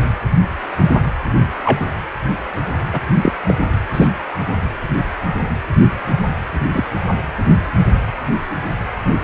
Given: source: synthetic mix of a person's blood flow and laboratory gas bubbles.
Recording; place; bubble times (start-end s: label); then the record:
Doppler ultrasound of blood flow; precordium
1.65-1.80 s: bubbles
2.92-3.00 s: bubbles
3.21-3.32 s: bubbles
3.47-3.54 s: bubbles
3.94-4.08 s: bubbles
6.73-6.85 s: bubbles
From the record:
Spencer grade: 2 (many but less than half of the cardiac periods contain bubble signals, singularly or in groups); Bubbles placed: anywhere in the cardiac cycle